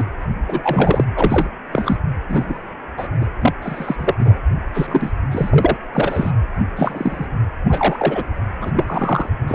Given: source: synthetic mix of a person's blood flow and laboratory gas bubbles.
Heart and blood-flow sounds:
Doppler ultrasound of blood flow; precordium
0.00-0.03 s: bubbles
0.48-1.04 s: bubbles
1.16-1.47 s: bubbles
1.71-1.97 s: bubbles
2.28-2.58 s: bubbles
2.97-3.08 s: bubbles
3.21-3.26 s: bubbles
3.42-3.53 s: bubbles
3.62-4.15 s: bubbles
4.19-4.37 s: bubbles
4.74-5.12 s: bubbles
5.31-5.50 s: bubbles
5.53-5.77 s: bubbles
5.92-6.31 s: bubbles
6.76-7.26 s: bubbles
7.65-8.23 s: bubbles
8.61-8.71 s: bubbles
8.74-9.29 s: bubbles
9.47-9.55 s: bubbles
From the record:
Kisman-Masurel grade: 243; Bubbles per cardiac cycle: several, 3 to 8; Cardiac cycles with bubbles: 100%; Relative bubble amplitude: loud (0.450 to 0.775); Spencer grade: 3 (all of the cardiac periods contain showers or single bubble signals, but not dominating or overriding the cardiac motion signals); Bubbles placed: anywhere in the cardiac cycle

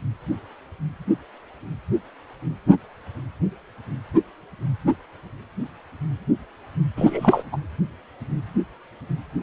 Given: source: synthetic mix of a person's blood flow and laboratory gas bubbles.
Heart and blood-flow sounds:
Doppler ultrasound of blood flow; precordium
6.96-7.43 s: bubbles
7.52-7.57 s: bubbles
From the record:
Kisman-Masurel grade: 212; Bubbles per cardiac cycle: several, 3 to 8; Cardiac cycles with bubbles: 1 to 10%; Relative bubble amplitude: moderate (0.250 to 0.450); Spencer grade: 1 (occasional bubble signal discernible with the cardiac motion signal, with majority of cardiac periods free of bubbles); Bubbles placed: anywhere in the cardiac cycle

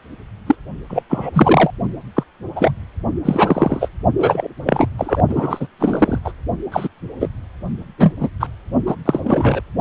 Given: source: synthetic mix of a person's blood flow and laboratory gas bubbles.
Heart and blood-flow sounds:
Doppler ultrasound of blood flow; precordium
0.46-0.56 s: bubbles
0.90-1.02 s: bubbles
1.09-1.70 s: bubbles
2.16-2.23 s: bubbles
2.55-2.71 s: bubbles
3.25-3.88 s: bubbles
4.19-4.48 s: bubbles
4.66-4.87 s: bubbles
4.98-5.22 s: bubbles
5.28-5.67 s: bubbles
5.79-6.19 s: bubbles
6.25-6.32 s: bubbles
6.72-6.88 s: bubbles
7.21-7.29 s: bubbles
7.98-8.13 s: bubbles
8.20-8.28 s: bubbles
8.40-8.47 s: bubbles
8.86-8.96 s: bubbles
9.05-9.20 s: bubbles
9.24-9.61 s: bubbles
From the record:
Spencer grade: 3 (all of the cardiac periods contain showers or single bubble signals, but not dominating or overriding the cardiac motion signals); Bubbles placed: only in the low amplitude regions of the cardiac cycle

